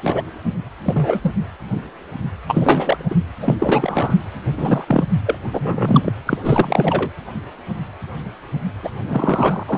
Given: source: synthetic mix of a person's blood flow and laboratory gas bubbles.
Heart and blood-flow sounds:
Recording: Doppler ultrasound of blood flow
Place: precordium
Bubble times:
0.02-0.22 s: bubbles
0.84-1.20 s: bubbles
1.23-1.34 s: bubbles
2.48-3.05 s: bubbles
3.10-3.16 s: bubbles
3.40-3.56 s: bubbles
3.58-4.18 s: bubbles
4.57-5.04 s: bubbles
5.25-5.38 s: bubbles
5.52-6.12 s: bubbles
6.26-6.38 s: bubbles
6.42-7.11 s: bubbles
8.83-8.89 s: bubbles
9.05-9.63 s: bubbles
9.67-9.78 s: bubbles
From the record:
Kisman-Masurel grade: 333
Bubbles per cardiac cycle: rolling drumbeat, 9 or more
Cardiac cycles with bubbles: 50 to 99%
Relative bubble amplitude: loud (0.450 to 0.775)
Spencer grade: 3 (all of the cardiac periods contain showers or single bubble signals, but not dominating or overriding the cardiac motion signals)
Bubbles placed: anywhere in the cardiac cycle

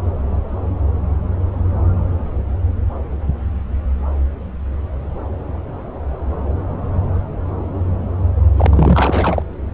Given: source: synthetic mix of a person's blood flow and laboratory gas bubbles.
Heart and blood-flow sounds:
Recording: Doppler ultrasound of blood flow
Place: subclavian vein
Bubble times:
8.56-9.42 s: bubbles
From the record:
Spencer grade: 1 (occasional bubble signal discernible with the cardiac motion signal, with majority of cardiac periods free of bubbles)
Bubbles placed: anywhere in the cardiac cycle

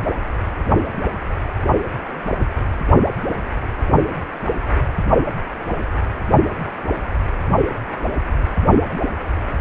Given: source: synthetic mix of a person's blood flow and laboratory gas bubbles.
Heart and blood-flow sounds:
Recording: Doppler ultrasound of blood flow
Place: precordium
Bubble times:
no bubbles
From the record:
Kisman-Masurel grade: 000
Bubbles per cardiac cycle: 0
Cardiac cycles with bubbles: 0%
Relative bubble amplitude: no bubbles discernible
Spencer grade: 0 (complete lack of bubble signals)

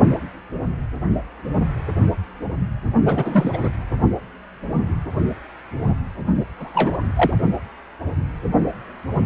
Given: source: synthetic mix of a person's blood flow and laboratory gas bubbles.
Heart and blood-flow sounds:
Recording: Doppler ultrasound of blood flow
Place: precordium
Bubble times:
3.05-3.69 s: bubbles
6.58-6.97 s: bubbles
7.16-7.33 s: bubbles
From the record:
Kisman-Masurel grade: 222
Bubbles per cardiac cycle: several, 3 to 8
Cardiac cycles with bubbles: 10 to 50%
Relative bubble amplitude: moderate (0.250 to 0.450)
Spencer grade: 2 (many but less than half of the cardiac periods contain bubble signals, singularly or in groups)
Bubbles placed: only in the low amplitude regions of the cardiac cycle

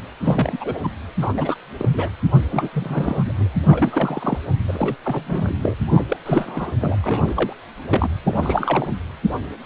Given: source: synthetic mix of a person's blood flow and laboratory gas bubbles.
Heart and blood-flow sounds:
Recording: Doppler ultrasound of blood flow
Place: precordium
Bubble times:
0.23-0.78 s: bubbles
0.83-0.92 s: bubbles
1.17-1.29 s: bubbles
1.34-1.55 s: bubbles
1.78-1.89 s: bubbles
1.93-2.09 s: bubbles
2.52-3.33 s: bubbles
3.38-3.48 s: bubbles
3.66-4.38 s: bubbles
4.67-4.96 s: bubbles
5.04-5.76 s: bubbles
5.88-6.04 s: bubbles
6.08-6.17 s: bubbles
6.25-6.72 s: bubbles
6.80-6.96 s: bubbles
7.02-7.53 s: bubbles
7.88-8.09 s: bubbles
8.23-8.88 s: bubbles
From the record:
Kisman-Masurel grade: 342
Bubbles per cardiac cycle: rolling drumbeat, 9 or more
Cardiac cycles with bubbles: 100%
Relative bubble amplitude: moderate (0.250 to 0.450)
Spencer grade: 3 (all of the cardiac periods contain showers or single bubble signals, but not dominating or overriding the cardiac motion signals)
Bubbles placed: anywhere in the cardiac cycle

